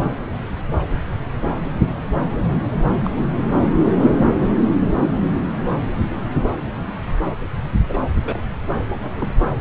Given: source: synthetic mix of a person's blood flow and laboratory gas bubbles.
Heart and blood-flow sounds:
Doppler ultrasound of blood flow; subclavian vein
3.03-3.10 s: bubbles
3.17-3.26 s: bubbles
7.89-7.98 s: bubbles
8.25-8.41 s: bubbles
8.89-9.32 s: bubbles
From the record:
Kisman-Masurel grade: 121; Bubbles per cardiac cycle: 1 to 2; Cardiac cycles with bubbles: 10 to 50%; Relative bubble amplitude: barely perceptible (0.100 to 0.250); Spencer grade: 2 (many but less than half of the cardiac periods contain bubble signals, singularly or in groups); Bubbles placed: anywhere in the cardiac cycle

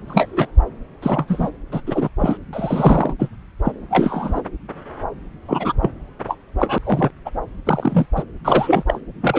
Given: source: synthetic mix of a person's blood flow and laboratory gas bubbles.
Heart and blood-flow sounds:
Doppler ultrasound of blood flow; subclavian vein
0.07-0.47 s: bubbles
1.02-1.50 s: bubbles
1.71-1.81 s: bubbles
1.86-2.09 s: bubbles
2.19-2.38 s: bubbles
2.52-3.13 s: bubbles
3.19-3.30 s: bubbles
3.63-3.72 s: bubbles
3.90-4.42 s: bubbles
5.48-5.73 s: bubbles
5.82-5.91 s: bubbles
6.27-6.36 s: bubbles
6.58-6.78 s: bubbles
6.84-7.11 s: bubbles
7.25-7.31 s: bubbles
7.67-8.05 s: bubbles
8.16-8.23 s: bubbles
8.45-8.83 s: bubbles
8.87-8.98 s: bubbles
9.21-9.39 s: bubbles
From the record:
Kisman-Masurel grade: 233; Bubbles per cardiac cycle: several, 3 to 8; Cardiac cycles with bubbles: 50 to 99%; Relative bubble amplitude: loud (0.450 to 0.775); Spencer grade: 3 (all of the cardiac periods contain showers or single bubble signals, but not dominating or overriding the cardiac motion signals); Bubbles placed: anywhere in the cardiac cycle

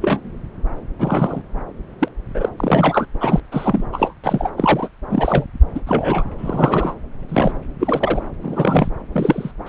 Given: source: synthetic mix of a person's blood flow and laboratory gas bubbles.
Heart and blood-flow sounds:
Doppler ultrasound of blood flow; subclavian vein
0.00-0.41 s: bubbles
0.98-1.42 s: bubbles
1.99-2.09 s: bubbles
2.34-2.49 s: bubbles
2.58-3.06 s: bubbles
3.21-3.40 s: bubbles
3.52-3.84 s: bubbles
3.92-4.13 s: bubbles
4.24-4.50 s: bubbles
4.57-4.88 s: bubbles
5.10-5.46 s: bubbles
5.75-5.81 s: bubbles
5.87-6.24 s: bubbles
6.38-6.94 s: bubbles
7.28-7.53 s: bubbles
7.79-8.28 s: bubbles
8.42-8.89 s: bubbles
9.12-9.52 s: bubbles
9.66-9.69 s: bubbles
From the record:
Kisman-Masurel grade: 233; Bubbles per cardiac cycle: several, 3 to 8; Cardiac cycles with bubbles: 50 to 99%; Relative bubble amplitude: loud (0.450 to 0.775); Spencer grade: 3 (all of the cardiac periods contain showers or single bubble signals, but not dominating or overriding the cardiac motion signals); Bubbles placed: anywhere in the cardiac cycle

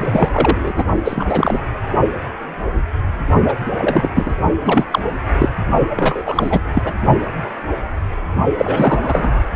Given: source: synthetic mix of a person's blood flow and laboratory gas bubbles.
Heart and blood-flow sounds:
Doppler ultrasound of blood flow; precordium
0.00-0.84 s: bubbles
1.04-1.61 s: bubbles
3.48-3.54 s: bubbles
3.74-4.11 s: bubbles
4.15-4.34 s: bubbles
4.61-4.85 s: bubbles
4.91-5.01 s: bubbles
5.40-5.50 s: bubbles
5.96-6.23 s: bubbles
6.25-6.61 s: bubbles
6.74-6.94 s: bubbles
8.57-8.99 s: bubbles
9.01-9.43 s: bubbles
From the record:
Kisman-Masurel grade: 333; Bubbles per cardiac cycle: rolling drumbeat, 9 or more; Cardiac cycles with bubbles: 50 to 99%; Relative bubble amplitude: loud (0.450 to 0.775); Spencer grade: 3 (all of the cardiac periods contain showers or single bubble signals, but not dominating or overriding the cardiac motion signals); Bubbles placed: only in the low amplitude regions of the cardiac cycle

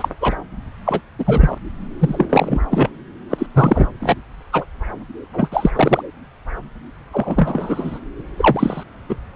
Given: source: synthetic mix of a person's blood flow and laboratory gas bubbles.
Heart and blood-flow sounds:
Doppler ultrasound of blood flow; subclavian vein
0.00-0.08 s: bubbles
0.20-0.35 s: bubbles
0.85-1.01 s: bubbles
1.18-1.58 s: bubbles
1.99-2.60 s: bubbles
2.71-2.90 s: bubbles
3.30-3.46 s: bubbles
3.54-3.86 s: bubbles
4.00-4.15 s: bubbles
4.52-4.65 s: bubbles
5.33-5.48 s: bubbles
5.51-5.70 s: bubbles
5.75-6.03 s: bubbles
7.12-7.99 s: bubbles
8.37-8.83 s: bubbles
9.08-9.16 s: bubbles
From the record:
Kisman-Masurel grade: 233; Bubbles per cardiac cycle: several, 3 to 8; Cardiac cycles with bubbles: 50 to 99%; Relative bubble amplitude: loud (0.450 to 0.775); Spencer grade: 3 (all of the cardiac periods contain showers or single bubble signals, but not dominating or overriding the cardiac motion signals); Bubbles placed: anywhere in the cardiac cycle

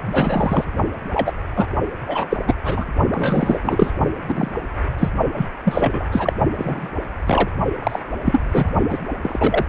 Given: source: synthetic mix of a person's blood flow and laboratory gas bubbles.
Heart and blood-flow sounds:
Doppler ultrasound of blood flow; precordium
0.06-0.71 s: bubbles
1.14-1.33 s: bubbles
1.55-1.67 s: bubbles
2.07-2.28 s: bubbles
2.30-2.38 s: bubbles
2.47-2.54 s: bubbles
2.64-2.85 s: bubbles
3.12-3.60 s: bubbles
3.63-3.94 s: bubbles
4.27-4.51 s: bubbles
4.98-5.09 s: bubbles
5.35-5.47 s: bubbles
5.64-6.05 s: bubbles
6.11-6.33 s: bubbles
6.56-6.91 s: bubbles
7.26-7.50 s: bubbles
7.79-7.99 s: bubbles
8.24-8.71 s: bubbles
8.89-8.98 s: bubbles
9.21-9.65 s: bubbles
From the record:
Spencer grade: 3 (all of the cardiac periods contain showers or single bubble signals, but not dominating or overriding the cardiac motion signals); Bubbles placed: only in the low amplitude regions of the cardiac cycle

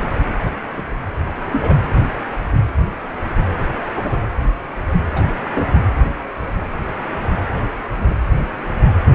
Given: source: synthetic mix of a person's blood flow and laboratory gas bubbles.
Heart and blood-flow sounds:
Doppler ultrasound of blood flow; precordium
0.77-0.82 s: bubbles
1.53-1.75 s: bubbles
3.96-4.17 s: bubbles
5.16-5.20 s: bubbles
5.55-5.67 s: bubbles
7.96-8.15 s: bubbles
From the record:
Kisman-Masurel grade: 122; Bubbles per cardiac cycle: 1 to 2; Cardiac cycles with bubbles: 10 to 50%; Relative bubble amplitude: moderate (0.250 to 0.450); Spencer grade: 2 (many but less than half of the cardiac periods contain bubble signals, singularly or in groups); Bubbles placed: anywhere in the cardiac cycle

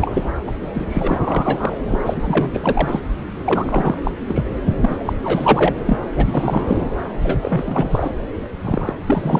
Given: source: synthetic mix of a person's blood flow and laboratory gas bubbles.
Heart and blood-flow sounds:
Doppler ultrasound of blood flow; subclavian vein
0.00-0.31 s: bubbles
0.46-0.52 s: bubbles
0.73-3.00 s: bubbles
3.44-3.98 s: bubbles
4.04-4.11 s: bubbles
4.28-4.43 s: bubbles
4.65-4.74 s: bubbles
4.81-4.97 s: bubbles
5.05-5.13 s: bubbles
5.23-5.74 s: bubbles
5.85-5.98 s: bubbles
6.16-6.90 s: bubbles
7.23-8.10 s: bubbles
8.65-8.94 s: bubbles
9.07-9.40 s: bubbles
From the record:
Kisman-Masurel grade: 343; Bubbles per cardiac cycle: rolling drumbeat, 9 or more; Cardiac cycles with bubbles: 100%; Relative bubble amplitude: loud (0.450 to 0.775); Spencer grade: 3 (all of the cardiac periods contain showers or single bubble signals, but not dominating or overriding the cardiac motion signals); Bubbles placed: anywhere in the cardiac cycle

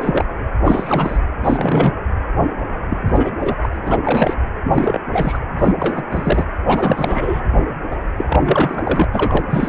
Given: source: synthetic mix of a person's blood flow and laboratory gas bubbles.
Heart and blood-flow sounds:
Doppler ultrasound of blood flow; precordium
0.00-0.25 s: bubbles
0.65-1.19 s: bubbles
1.44-1.93 s: bubbles
2.90-2.98 s: bubbles
3.06-3.35 s: bubbles
3.40-3.55 s: bubbles
3.62-3.69 s: bubbles
3.73-3.77 s: bubbles
3.82-4.00 s: bubbles
4.04-4.34 s: bubbles
4.63-5.00 s: bubbles
5.12-5.38 s: bubbles
5.58-5.73 s: bubbles
5.79-6.03 s: bubbles
6.11-6.44 s: bubbles
6.67-7.41 s: bubbles
7.91-7.97 s: bubbles
8.17-9.04 s: bubbles
9.12-9.44 s: bubbles
9.49-9.69 s: bubbles
From the record:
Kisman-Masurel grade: 343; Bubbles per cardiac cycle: rolling drumbeat, 9 or more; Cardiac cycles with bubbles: 100%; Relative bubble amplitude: loud (0.450 to 0.775); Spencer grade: 3 (all of the cardiac periods contain showers or single bubble signals, but not dominating or overriding the cardiac motion signals); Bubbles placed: anywhere in the cardiac cycle

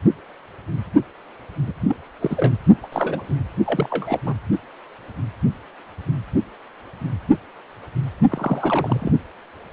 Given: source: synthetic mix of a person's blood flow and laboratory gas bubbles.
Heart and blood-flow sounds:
Doppler ultrasound of blood flow; precordium
1.67-1.72 s: bubbles
1.88-1.97 s: bubbles
2.19-2.54 s: bubbles
2.82-2.87 s: bubbles
2.92-3.33 s: bubbles
3.65-4.20 s: bubbles
4.26-4.34 s: bubbles
8.29-9.12 s: bubbles
From the record:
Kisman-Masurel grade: 232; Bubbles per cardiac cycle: several, 3 to 8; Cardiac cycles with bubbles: 50 to 99%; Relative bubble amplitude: moderate (0.250 to 0.450); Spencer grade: 3 (all of the cardiac periods contain showers or single bubble signals, but not dominating or overriding the cardiac motion signals); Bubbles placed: only in the low amplitude regions of the cardiac cycle

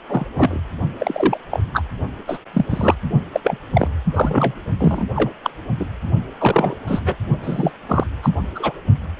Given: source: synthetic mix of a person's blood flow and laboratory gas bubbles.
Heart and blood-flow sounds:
Doppler ultrasound of blood flow; precordium
0.07-0.26 s: bubbles
0.36-0.60 s: bubbles
0.98-1.38 s: bubbles
1.51-1.60 s: bubbles
1.73-1.83 s: bubbles
2.27-2.38 s: bubbles
2.53-2.65 s: bubbles
2.69-2.95 s: bubbles
3.32-3.40 s: bubbles
3.44-3.58 s: bubbles
3.74-3.88 s: bubbles
4.14-4.54 s: bubbles
4.79-5.04 s: bubbles
5.14-5.30 s: bubbles
5.43-5.50 s: bubbles
5.79-5.87 s: bubbles
6.40-6.76 s: bubbles
6.87-6.99 s: bubbles
7.04-7.16 s: bubbles
7.42-7.71 s: bubbles
7.88-8.04 s: bubbles
8.22-8.30 s: bubbles
8.55-8.77 s: bubbles
From the record:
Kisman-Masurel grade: 243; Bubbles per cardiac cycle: several, 3 to 8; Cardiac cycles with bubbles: 100%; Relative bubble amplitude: loud (0.450 to 0.775); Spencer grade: 3 (all of the cardiac periods contain showers or single bubble signals, but not dominating or overriding the cardiac motion signals); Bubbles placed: only in the low amplitude regions of the cardiac cycle

